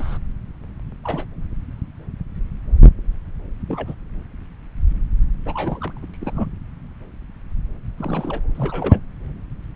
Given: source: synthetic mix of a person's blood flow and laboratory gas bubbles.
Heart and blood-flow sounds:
Doppler ultrasound of blood flow; subclavian vein
0.00-0.18 s: bubbles
1.04-1.26 s: bubbles
3.68-3.95 s: bubbles
5.46-5.92 s: bubbles
5.96-6.00 s: bubbles
6.02-6.06 s: bubbles
6.13-6.17 s: bubbles
6.21-6.48 s: bubbles
7.97-8.41 s: bubbles
8.54-9.01 s: bubbles
From the record:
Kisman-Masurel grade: 221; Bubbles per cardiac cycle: several, 3 to 8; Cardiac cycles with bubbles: 10 to 50%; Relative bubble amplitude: barely perceptible (0.100 to 0.250); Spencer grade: 2 (many but less than half of the cardiac periods contain bubble signals, singularly or in groups); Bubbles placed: anywhere in the cardiac cycle

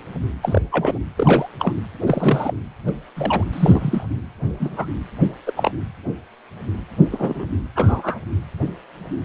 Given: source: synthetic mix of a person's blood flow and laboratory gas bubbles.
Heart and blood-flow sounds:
Doppler ultrasound of blood flow; precordium
0.42-0.61 s: bubbles
0.71-0.98 s: bubbles
1.17-1.49 s: bubbles
1.59-1.73 s: bubbles
2.00-2.55 s: bubbles
2.87-2.91 s: bubbles
3.16-3.44 s: bubbles
3.53-4.04 s: bubbles
4.59-4.87 s: bubbles
5.21-5.29 s: bubbles
5.46-5.53 s: bubbles
5.56-5.72 s: bubbles
7.11-7.45 s: bubbles
7.75-8.19 s: bubbles
From the record:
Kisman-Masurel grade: 232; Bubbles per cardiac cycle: several, 3 to 8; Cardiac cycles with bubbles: 50 to 99%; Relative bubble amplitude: moderate (0.250 to 0.450); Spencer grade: 3 (all of the cardiac periods contain showers or single bubble signals, but not dominating or overriding the cardiac motion signals); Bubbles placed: anywhere in the cardiac cycle

